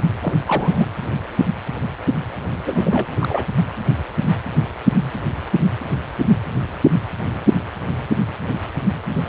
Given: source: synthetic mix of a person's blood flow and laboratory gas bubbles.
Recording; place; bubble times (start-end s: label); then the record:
Doppler ultrasound of blood flow; precordium
0.20-0.34 s: bubbles
0.46-0.88 s: bubbles
2.66-3.06 s: bubbles
3.19-3.47 s: bubbles
From the record:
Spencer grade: 2 (many but less than half of the cardiac periods contain bubble signals, singularly or in groups); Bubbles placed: anywhere in the cardiac cycle